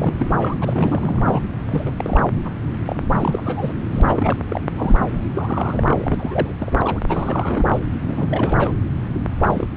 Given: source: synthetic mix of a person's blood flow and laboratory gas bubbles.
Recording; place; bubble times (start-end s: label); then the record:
Doppler ultrasound of blood flow; subclavian vein
0.00-0.14 s: bubbles
0.17-0.56 s: bubbles
0.60-1.42 s: bubbles
1.68-1.91 s: bubbles
1.98-2.25 s: bubbles
2.45-2.51 s: bubbles
2.85-2.96 s: bubbles
3.10-3.76 s: bubbles
3.91-4.02 s: bubbles
4.07-4.38 s: bubbles
4.49-4.61 s: bubbles
4.74-4.95 s: bubbles
5.13-5.20 s: bubbles
5.35-6.54 s: bubbles
6.58-6.75 s: bubbles
6.81-7.00 s: bubbles
7.08-7.65 s: bubbles
7.68-7.79 s: bubbles
8.01-8.72 s: bubbles
9.40-9.67 s: bubbles
From the record:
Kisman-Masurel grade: 332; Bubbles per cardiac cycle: rolling drumbeat, 9 or more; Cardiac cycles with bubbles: 50 to 99%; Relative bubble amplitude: moderate (0.250 to 0.450); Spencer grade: 3 (all of the cardiac periods contain showers or single bubble signals, but not dominating or overriding the cardiac motion signals); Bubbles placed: anywhere in the cardiac cycle